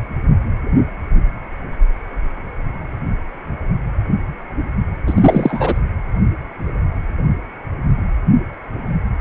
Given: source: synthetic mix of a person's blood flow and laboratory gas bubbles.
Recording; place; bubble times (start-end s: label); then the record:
Doppler ultrasound of blood flow; precordium
5.07-5.79 s: bubbles
From the record:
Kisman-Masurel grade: 213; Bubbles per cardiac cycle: several, 3 to 8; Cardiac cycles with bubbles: 1 to 10%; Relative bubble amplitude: loud (0.450 to 0.775); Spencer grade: 1 (occasional bubble signal discernible with the cardiac motion signal, with majority of cardiac periods free of bubbles); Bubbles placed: anywhere in the cardiac cycle